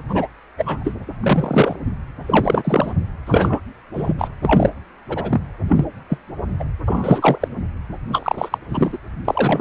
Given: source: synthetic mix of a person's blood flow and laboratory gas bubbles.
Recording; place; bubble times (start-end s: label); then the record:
Doppler ultrasound of blood flow; precordium
0.09-0.28 s: bubbles
0.57-0.93 s: bubbles
1.23-1.77 s: bubbles
2.26-2.94 s: bubbles
3.26-3.60 s: bubbles
3.94-4.13 s: bubbles
4.18-4.29 s: bubbles
4.43-4.70 s: bubbles
5.08-5.41 s: bubbles
5.69-5.85 s: bubbles
6.09-6.18 s: bubbles
6.60-6.64 s: bubbles
6.88-7.48 s: bubbles
8.12-8.58 s: bubbles
8.68-8.98 s: bubbles
9.25-9.61 s: bubbles
From the record:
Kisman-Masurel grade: 243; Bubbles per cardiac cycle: several, 3 to 8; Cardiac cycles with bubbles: 100%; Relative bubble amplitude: loud (0.450 to 0.775); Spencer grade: 3 (all of the cardiac periods contain showers or single bubble signals, but not dominating or overriding the cardiac motion signals); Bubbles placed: anywhere in the cardiac cycle